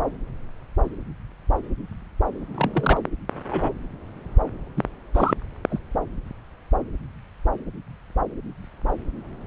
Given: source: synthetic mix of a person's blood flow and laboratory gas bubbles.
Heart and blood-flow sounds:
Doppler ultrasound of blood flow; subclavian vein
2.54-2.99 s: bubbles
3.51-3.72 s: bubbles
4.76-4.83 s: bubbles
5.14-5.33 s: bubbles
5.70-5.79 s: bubbles
From the record:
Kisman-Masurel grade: 122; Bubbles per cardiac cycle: 1 to 2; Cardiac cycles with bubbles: 10 to 50%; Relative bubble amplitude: moderate (0.250 to 0.450); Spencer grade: 2 (many but less than half of the cardiac periods contain bubble signals, singularly or in groups); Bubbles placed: anywhere in the cardiac cycle

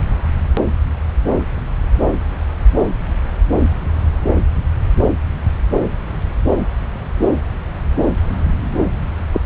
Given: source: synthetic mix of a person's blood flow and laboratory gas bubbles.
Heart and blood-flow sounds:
Doppler ultrasound of blood flow; subclavian vein
9.34-9.40 s: bubbles
From the record:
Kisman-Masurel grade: 113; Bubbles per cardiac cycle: 1 to 2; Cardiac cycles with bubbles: 1 to 10%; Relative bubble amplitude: loud (0.450 to 0.775); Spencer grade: 1 (occasional bubble signal discernible with the cardiac motion signal, with majority of cardiac periods free of bubbles); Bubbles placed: anywhere in the cardiac cycle

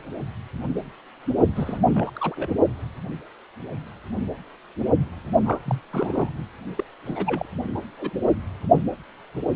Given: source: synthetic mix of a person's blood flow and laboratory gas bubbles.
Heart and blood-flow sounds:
Doppler ultrasound of blood flow; precordium
1.56-2.12 s: bubbles
2.16-2.52 s: bubbles
5.44-5.58 s: bubbles
5.65-5.81 s: bubbles
5.91-6.29 s: bubbles
6.77-6.84 s: bubbles
7.05-7.45 s: bubbles
7.75-7.80 s: bubbles
7.99-8.18 s: bubbles
From the record:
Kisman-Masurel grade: 222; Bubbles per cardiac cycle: several, 3 to 8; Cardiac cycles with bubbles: 10 to 50%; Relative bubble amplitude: moderate (0.250 to 0.450); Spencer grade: 2 (many but less than half of the cardiac periods contain bubble signals, singularly or in groups); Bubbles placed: only in the low amplitude regions of the cardiac cycle

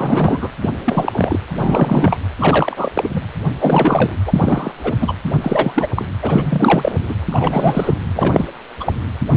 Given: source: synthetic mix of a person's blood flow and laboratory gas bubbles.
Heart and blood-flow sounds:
Doppler ultrasound of blood flow; precordium
0.00-0.48 s: bubbles
0.62-0.71 s: bubbles
0.84-1.39 s: bubbles
1.55-2.18 s: bubbles
2.39-2.92 s: bubbles
2.95-3.21 s: bubbles
3.59-4.16 s: bubbles
4.25-4.71 s: bubbles
4.83-4.93 s: bubbles
5.00-5.13 s: bubbles
5.41-5.87 s: bubbles
5.96-6.05 s: bubbles
6.22-6.96 s: bubbles
7.08-7.15 s: bubbles
7.22-7.26 s: bubbles
7.32-7.94 s: bubbles
8.14-8.48 s: bubbles
8.79-8.93 s: bubbles
9.31-9.37 s: bubbles
From the record:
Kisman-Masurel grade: 343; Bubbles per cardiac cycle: rolling drumbeat, 9 or more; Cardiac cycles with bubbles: 100%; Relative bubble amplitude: loud (0.450 to 0.775); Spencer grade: 3 (all of the cardiac periods contain showers or single bubble signals, but not dominating or overriding the cardiac motion signals); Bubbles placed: anywhere in the cardiac cycle

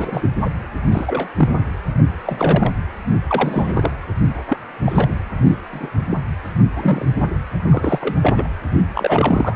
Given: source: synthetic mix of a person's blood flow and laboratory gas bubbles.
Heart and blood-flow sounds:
Doppler ultrasound of blood flow; precordium
0.00-0.30 s: bubbles
0.44-0.49 s: bubbles
0.91-1.29 s: bubbles
1.38-1.60 s: bubbles
2.26-2.73 s: bubbles
3.27-3.91 s: bubbles
4.48-4.57 s: bubbles
4.84-5.08 s: bubbles
5.44-5.56 s: bubbles
5.71-5.88 s: bubbles
6.10-6.17 s: bubbles
6.75-7.08 s: bubbles
7.18-7.27 s: bubbles
7.64-8.17 s: bubbles
8.22-8.48 s: bubbles
8.94-9.56 s: bubbles
From the record:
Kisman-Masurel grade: 242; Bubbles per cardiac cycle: several, 3 to 8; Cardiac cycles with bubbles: 100%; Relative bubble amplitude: moderate (0.250 to 0.450); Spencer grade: 3 (all of the cardiac periods contain showers or single bubble signals, but not dominating or overriding the cardiac motion signals); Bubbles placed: anywhere in the cardiac cycle

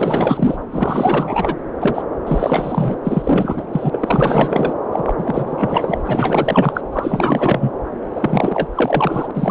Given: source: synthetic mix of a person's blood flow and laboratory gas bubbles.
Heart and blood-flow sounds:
Doppler ultrasound of blood flow; subclavian vein
0.00-0.57 s: bubbles
0.72-1.56 s: bubbles
1.79-2.03 s: bubbles
2.26-2.94 s: bubbles
3.04-3.63 s: bubbles
3.72-4.74 s: bubbles
4.92-5.14 s: bubbles
5.18-6.81 s: bubbles
6.92-7.71 s: bubbles
8.15-8.68 s: bubbles
8.75-9.31 s: bubbles
9.33-9.51 s: bubbles
From the record:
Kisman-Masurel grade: 444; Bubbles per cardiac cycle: continuous sound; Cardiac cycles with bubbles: 100%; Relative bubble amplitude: maximal (0.775 to 0.999); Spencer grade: 4 (maximum detectable bubble signal sounding continuously throughout systole and diastole of every cardiac period, and overriding the amplitude of the normal cardiac signals); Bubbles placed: anywhere in the cardiac cycle

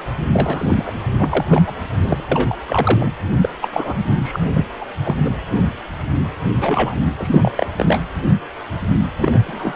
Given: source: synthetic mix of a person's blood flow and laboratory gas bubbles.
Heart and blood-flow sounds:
Doppler ultrasound of blood flow; precordium
0.33-0.94 s: bubbles
1.19-1.64 s: bubbles
1.67-1.74 s: bubbles
2.02-2.24 s: bubbles
2.31-2.62 s: bubbles
2.66-3.12 s: bubbles
3.42-3.49 s: bubbles
3.62-3.69 s: bubbles
3.72-4.04 s: bubbles
4.23-4.39 s: bubbles
4.54-4.65 s: bubbles
4.80-4.85 s: bubbles
5.04-5.15 s: bubbles
5.24-5.30 s: bubbles
6.61-7.04 s: bubbles
7.19-7.51 s: bubbles
7.55-7.67 s: bubbles
7.77-8.00 s: bubbles
9.20-9.42 s: bubbles
9.45-9.76 s: bubbles
From the record:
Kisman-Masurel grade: 233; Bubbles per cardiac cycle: several, 3 to 8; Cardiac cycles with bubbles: 50 to 99%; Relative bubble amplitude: loud (0.450 to 0.775); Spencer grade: 3 (all of the cardiac periods contain showers or single bubble signals, but not dominating or overriding the cardiac motion signals); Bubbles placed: anywhere in the cardiac cycle

